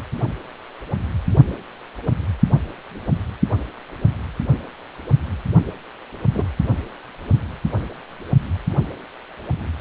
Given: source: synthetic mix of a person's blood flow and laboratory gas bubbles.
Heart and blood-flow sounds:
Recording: Doppler ultrasound of blood flow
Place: precordium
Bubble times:
6.33-6.46 s: bubbles
From the record:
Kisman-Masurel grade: 112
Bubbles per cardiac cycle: 1 to 2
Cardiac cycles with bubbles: 1 to 10%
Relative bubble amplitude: moderate (0.250 to 0.450)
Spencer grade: 1 (occasional bubble signal discernible with the cardiac motion signal, with majority of cardiac periods free of bubbles)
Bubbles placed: only in the low amplitude regions of the cardiac cycle

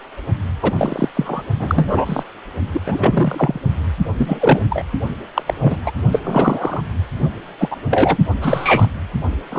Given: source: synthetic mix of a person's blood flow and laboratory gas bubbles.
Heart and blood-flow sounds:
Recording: Doppler ultrasound of blood flow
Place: precordium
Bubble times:
0.62-0.72 s: bubbles
0.78-1.08 s: bubbles
1.15-1.42 s: bubbles
1.59-2.23 s: bubbles
2.74-2.80 s: bubbles
2.86-3.59 s: bubbles
4.17-4.59 s: bubbles
4.70-4.84 s: bubbles
5.34-5.44 s: bubbles
5.47-5.54 s: bubbles
5.61-5.77 s: bubbles
5.83-5.92 s: bubbles
6.12-6.20 s: bubbles
6.24-6.82 s: bubbles
7.59-7.76 s: bubbles
7.90-8.17 s: bubbles
8.41-8.86 s: bubbles
9.52-9.59 s: bubbles
From the record:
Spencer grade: 3 (all of the cardiac periods contain showers or single bubble signals, but not dominating or overriding the cardiac motion signals)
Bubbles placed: only in the low amplitude regions of the cardiac cycle

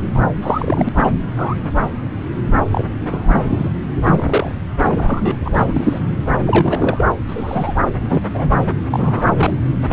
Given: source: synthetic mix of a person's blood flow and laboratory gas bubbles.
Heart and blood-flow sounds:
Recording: Doppler ultrasound of blood flow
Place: subclavian vein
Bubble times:
0.15-0.20 s: bubbles
0.42-0.89 s: bubbles
0.96-1.08 s: bubbles
1.36-1.55 s: bubbles
2.71-2.85 s: bubbles
3.10-3.69 s: bubbles
3.96-4.52 s: bubbles
4.82-5.36 s: bubbles
5.45-6.12 s: bubbles
6.45-7.05 s: bubbles
7.28-7.73 s: bubbles
8.09-8.21 s: bubbles
8.29-8.59 s: bubbles
8.90-9.29 s: bubbles
9.36-9.53 s: bubbles
9.89-9.93 s: bubbles
From the record:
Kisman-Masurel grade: 232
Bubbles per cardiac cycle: several, 3 to 8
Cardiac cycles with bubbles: 50 to 99%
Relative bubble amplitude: moderate (0.250 to 0.450)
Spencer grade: 3 (all of the cardiac periods contain showers or single bubble signals, but not dominating or overriding the cardiac motion signals)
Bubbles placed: anywhere in the cardiac cycle

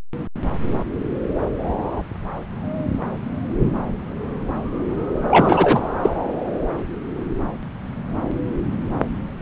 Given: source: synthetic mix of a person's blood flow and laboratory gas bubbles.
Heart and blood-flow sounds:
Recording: Doppler ultrasound of blood flow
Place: subclavian vein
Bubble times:
5.30-5.89 s: bubbles
6.03-6.09 s: bubbles
From the record:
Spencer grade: 1 (occasional bubble signal discernible with the cardiac motion signal, with majority of cardiac periods free of bubbles)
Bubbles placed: anywhere in the cardiac cycle

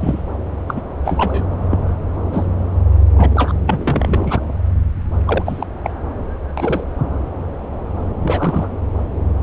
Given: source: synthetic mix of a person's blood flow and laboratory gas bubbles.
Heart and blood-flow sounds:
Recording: Doppler ultrasound of blood flow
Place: subclavian vein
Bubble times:
0.00-0.23 s: bubbles
0.68-0.81 s: bubbles
1.04-1.44 s: bubbles
1.71-1.79 s: bubbles
2.32-2.46 s: bubbles
3.16-3.52 s: bubbles
3.63-4.40 s: bubbles
5.25-5.67 s: bubbles
5.83-5.91 s: bubbles
6.57-6.85 s: bubbles
8.21-8.69 s: bubbles
From the record:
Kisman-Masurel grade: 233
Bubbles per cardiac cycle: several, 3 to 8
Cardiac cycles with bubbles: 50 to 99%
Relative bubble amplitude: loud (0.450 to 0.775)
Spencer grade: 3 (all of the cardiac periods contain showers or single bubble signals, but not dominating or overriding the cardiac motion signals)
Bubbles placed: anywhere in the cardiac cycle

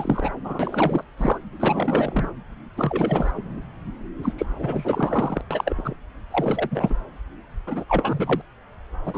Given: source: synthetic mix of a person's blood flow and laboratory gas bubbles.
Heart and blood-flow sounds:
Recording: Doppler ultrasound of blood flow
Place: subclavian vein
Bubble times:
0.00-0.31 s: bubbles
0.44-1.04 s: bubbles
1.17-1.39 s: bubbles
1.60-2.29 s: bubbles
2.77-3.31 s: bubbles
3.34-3.62 s: bubbles
4.23-4.33 s: bubbles
4.38-4.46 s: bubbles
4.58-5.41 s: bubbles
5.50-5.74 s: bubbles
5.76-5.94 s: bubbles
6.32-6.94 s: bubbles
7.67-7.84 s: bubbles
7.89-8.41 s: bubbles
9.05-9.18 s: bubbles
From the record:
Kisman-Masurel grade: 342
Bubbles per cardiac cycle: rolling drumbeat, 9 or more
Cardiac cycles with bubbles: 100%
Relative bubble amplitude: moderate (0.250 to 0.450)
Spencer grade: 3 (all of the cardiac periods contain showers or single bubble signals, but not dominating or overriding the cardiac motion signals)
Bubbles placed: anywhere in the cardiac cycle

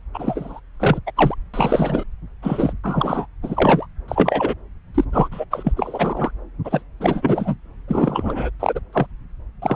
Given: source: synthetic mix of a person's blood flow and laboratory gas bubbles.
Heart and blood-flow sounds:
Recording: Doppler ultrasound of blood flow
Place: subclavian vein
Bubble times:
0.14-0.60 s: bubbles
0.80-0.99 s: bubbles
1.06-1.12 s: bubbles
1.16-1.35 s: bubbles
1.54-2.03 s: bubbles
2.42-2.73 s: bubbles
2.83-3.27 s: bubbles
3.42-3.86 s: bubbles
4.08-4.54 s: bubbles
4.94-5.04 s: bubbles
5.12-5.29 s: bubbles
5.31-5.45 s: bubbles
5.50-5.72 s: bubbles
5.76-6.31 s: bubbles
6.64-6.83 s: bubbles
7.00-7.55 s: bubbles
7.88-8.50 s: bubbles
8.60-8.79 s: bubbles
8.93-9.07 s: bubbles
9.62-9.76 s: bubbles
From the record:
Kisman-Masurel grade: 243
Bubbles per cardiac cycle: several, 3 to 8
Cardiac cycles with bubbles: 100%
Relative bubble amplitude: loud (0.450 to 0.775)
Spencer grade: 3 (all of the cardiac periods contain showers or single bubble signals, but not dominating or overriding the cardiac motion signals)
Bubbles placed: anywhere in the cardiac cycle

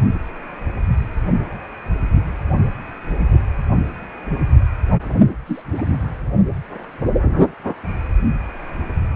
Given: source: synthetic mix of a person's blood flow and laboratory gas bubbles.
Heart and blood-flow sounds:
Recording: Doppler ultrasound of blood flow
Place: precordium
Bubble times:
5.46-5.61 s: bubbles
5.77-5.83 s: bubbles
From the record:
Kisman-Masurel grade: 111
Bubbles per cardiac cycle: 1 to 2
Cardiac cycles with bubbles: 1 to 10%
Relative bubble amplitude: barely perceptible (0.100 to 0.250)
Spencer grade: 1 (occasional bubble signal discernible with the cardiac motion signal, with majority of cardiac periods free of bubbles)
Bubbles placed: only in the low amplitude regions of the cardiac cycle

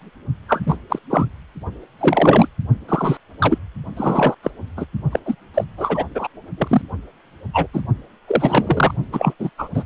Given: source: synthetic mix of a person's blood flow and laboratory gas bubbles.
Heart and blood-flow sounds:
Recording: Doppler ultrasound of blood flow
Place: precordium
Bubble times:
0.48-0.61 s: bubbles
0.66-0.77 s: bubbles
0.90-0.99 s: bubbles
1.09-1.25 s: bubbles
1.99-2.49 s: bubbles
2.88-3.18 s: bubbles
3.39-3.58 s: bubbles
3.97-4.34 s: bubbles
4.43-4.50 s: bubbles
4.76-4.85 s: bubbles
5.11-5.19 s: bubbles
5.25-5.35 s: bubbles
5.54-5.64 s: bubbles
5.77-6.04 s: bubbles
6.14-6.27 s: bubbles
6.57-6.81 s: bubbles
7.53-7.67 s: bubbles
7.73-7.81 s: bubbles
8.28-8.95 s: bubbles
9.12-9.34 s: bubbles
9.39-9.49 s: bubbles
9.58-9.68 s: bubbles
9.74-9.84 s: bubbles
From the record:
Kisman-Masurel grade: 243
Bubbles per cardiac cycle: several, 3 to 8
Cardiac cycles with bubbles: 100%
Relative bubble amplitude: loud (0.450 to 0.775)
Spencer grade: 3 (all of the cardiac periods contain showers or single bubble signals, but not dominating or overriding the cardiac motion signals)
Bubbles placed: only in the low amplitude regions of the cardiac cycle

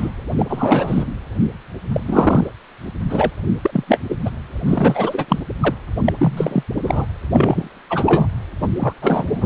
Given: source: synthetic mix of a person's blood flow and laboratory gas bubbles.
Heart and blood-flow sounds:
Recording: Doppler ultrasound of blood flow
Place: precordium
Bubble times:
0.00-0.10 s: bubbles
0.36-1.07 s: bubbles
1.93-2.00 s: bubbles
2.05-2.51 s: bubbles
3.09-3.31 s: bubbles
3.65-3.84 s: bubbles
3.88-3.98 s: bubbles
4.09-4.16 s: bubbles
4.25-4.30 s: bubbles
4.66-5.25 s: bubbles
5.28-5.39 s: bubbles
5.62-5.74 s: bubbles
6.04-6.12 s: bubbles
6.17-6.63 s: bubbles
6.83-7.05 s: bubbles
7.33-7.79 s: bubbles
7.90-8.28 s: bubbles
8.62-8.67 s: bubbles
8.78-8.93 s: bubbles
9.02-9.46 s: bubbles
From the record:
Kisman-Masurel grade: 343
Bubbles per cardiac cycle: rolling drumbeat, 9 or more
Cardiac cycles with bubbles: 100%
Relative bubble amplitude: loud (0.450 to 0.775)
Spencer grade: 3 (all of the cardiac periods contain showers or single bubble signals, but not dominating or overriding the cardiac motion signals)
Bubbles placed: anywhere in the cardiac cycle

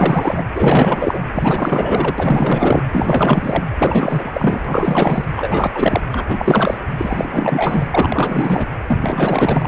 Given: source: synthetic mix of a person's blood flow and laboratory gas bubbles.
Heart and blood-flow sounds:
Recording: Doppler ultrasound of blood flow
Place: precordium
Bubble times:
0.00-0.45 s: bubbles
0.55-1.23 s: bubbles
1.34-2.15 s: bubbles
2.18-2.83 s: bubbles
2.92-3.64 s: bubbles
3.77-4.61 s: bubbles
4.64-5.25 s: bubbles
5.36-6.00 s: bubbles
6.11-6.77 s: bubbles
6.97-7.88 s: bubbles
7.93-8.67 s: bubbles
8.87-9.68 s: bubbles
From the record:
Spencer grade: 4 (maximum detectable bubble signal sounding continuously throughout systole and diastole of every cardiac period, and overriding the amplitude of the normal cardiac signals)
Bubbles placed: anywhere in the cardiac cycle

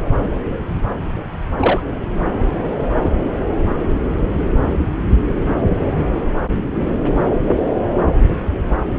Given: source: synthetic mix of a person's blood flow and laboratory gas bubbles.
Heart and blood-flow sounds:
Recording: Doppler ultrasound of blood flow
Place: subclavian vein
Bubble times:
1.57-1.80 s: bubbles
3.01-3.10 s: bubbles
From the record:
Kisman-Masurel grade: 122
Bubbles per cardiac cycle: 1 to 2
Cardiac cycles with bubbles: 10 to 50%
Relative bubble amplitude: moderate (0.250 to 0.450)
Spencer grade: 2 (many but less than half of the cardiac periods contain bubble signals, singularly or in groups)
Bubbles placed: anywhere in the cardiac cycle

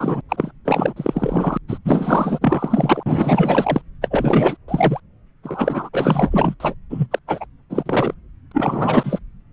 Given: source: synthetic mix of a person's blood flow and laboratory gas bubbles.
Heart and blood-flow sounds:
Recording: Doppler ultrasound of blood flow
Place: subclavian vein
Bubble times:
0.00-0.21 s: bubbles
0.28-0.52 s: bubbles
0.65-0.94 s: bubbles
0.96-1.57 s: bubbles
1.68-1.78 s: bubbles
1.84-2.38 s: bubbles
2.41-3.03 s: bubbles
3.06-3.82 s: bubbles
4.01-4.57 s: bubbles
4.68-5.00 s: bubbles
5.43-5.89 s: bubbles
5.93-6.55 s: bubbles
6.60-6.75 s: bubbles
6.89-7.06 s: bubbles
7.11-7.19 s: bubbles
7.27-7.46 s: bubbles
7.70-8.14 s: bubbles
8.51-9.19 s: bubbles
From the record:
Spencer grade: 4 (maximum detectable bubble signal sounding continuously throughout systole and diastole of every cardiac period, and overriding the amplitude of the normal cardiac signals)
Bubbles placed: anywhere in the cardiac cycle

